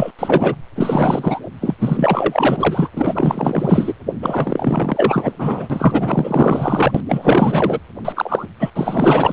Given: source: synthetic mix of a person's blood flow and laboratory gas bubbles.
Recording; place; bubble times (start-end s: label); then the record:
Doppler ultrasound of blood flow; precordium
0.00-0.11 s: bubbles
0.18-0.55 s: bubbles
0.75-1.39 s: bubbles
1.60-1.75 s: bubbles
1.79-2.89 s: bubbles
2.95-3.93 s: bubbles
4.21-5.33 s: bubbles
5.38-6.92 s: bubbles
6.94-7.00 s: bubbles
7.08-7.79 s: bubbles
8.04-8.12 s: bubbles
8.16-8.46 s: bubbles
8.60-8.70 s: bubbles
8.76-9.32 s: bubbles
From the record:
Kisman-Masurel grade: 444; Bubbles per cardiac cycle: continuous sound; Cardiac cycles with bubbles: 100%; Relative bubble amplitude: maximal (0.775 to 0.999); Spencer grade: 4 (maximum detectable bubble signal sounding continuously throughout systole and diastole of every cardiac period, and overriding the amplitude of the normal cardiac signals); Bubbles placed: anywhere in the cardiac cycle